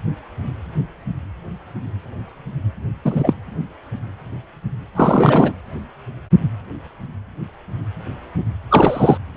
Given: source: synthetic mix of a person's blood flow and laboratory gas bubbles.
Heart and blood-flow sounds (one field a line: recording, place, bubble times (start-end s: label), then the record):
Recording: Doppler ultrasound of blood flow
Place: precordium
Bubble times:
3.04-3.33 s: bubbles
4.95-5.53 s: bubbles
8.70-9.17 s: bubbles
From the record:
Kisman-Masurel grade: 223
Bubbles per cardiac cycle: several, 3 to 8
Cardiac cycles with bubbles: 10 to 50%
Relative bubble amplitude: loud (0.450 to 0.775)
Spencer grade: 2 (many but less than half of the cardiac periods contain bubble signals, singularly or in groups)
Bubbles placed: anywhere in the cardiac cycle